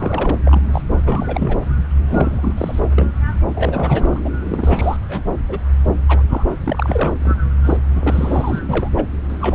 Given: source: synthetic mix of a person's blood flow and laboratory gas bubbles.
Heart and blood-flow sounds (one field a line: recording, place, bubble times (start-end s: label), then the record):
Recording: Doppler ultrasound of blood flow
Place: subclavian vein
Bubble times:
0.00-0.39 s: bubbles
0.46-0.62 s: bubbles
0.73-0.81 s: bubbles
0.90-1.56 s: bubbles
1.99-2.81 s: bubbles
2.95-3.11 s: bubbles
3.55-4.20 s: bubbles
4.25-4.29 s: bubbles
4.48-4.97 s: bubbles
5.08-5.38 s: bubbles
5.49-5.58 s: bubbles
6.08-6.24 s: bubbles
6.29-6.45 s: bubbles
6.64-7.13 s: bubbles
7.21-7.36 s: bubbles
7.65-7.77 s: bubbles
7.96-8.89 s: bubbles
8.95-9.09 s: bubbles
9.29-9.55 s: bubbles
From the record:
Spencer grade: 3 (all of the cardiac periods contain showers or single bubble signals, but not dominating or overriding the cardiac motion signals)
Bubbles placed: anywhere in the cardiac cycle